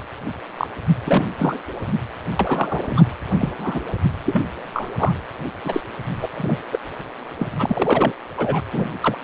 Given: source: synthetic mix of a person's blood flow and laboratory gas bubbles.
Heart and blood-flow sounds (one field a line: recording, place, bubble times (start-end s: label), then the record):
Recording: Doppler ultrasound of blood flow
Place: precordium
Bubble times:
0.57-0.67 s: bubbles
1.05-1.27 s: bubbles
1.36-1.58 s: bubbles
2.39-3.04 s: bubbles
3.39-3.52 s: bubbles
3.58-3.80 s: bubbles
4.25-4.42 s: bubbles
4.72-4.90 s: bubbles
4.98-5.13 s: bubbles
5.64-5.80 s: bubbles
6.15-6.27 s: bubbles
6.35-6.58 s: bubbles
6.71-6.79 s: bubbles
7.38-7.47 s: bubbles
7.58-8.12 s: bubbles
8.38-8.61 s: bubbles
8.72-8.89 s: bubbles
9.02-9.17 s: bubbles
From the record:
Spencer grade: 3 (all of the cardiac periods contain showers or single bubble signals, but not dominating or overriding the cardiac motion signals)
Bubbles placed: anywhere in the cardiac cycle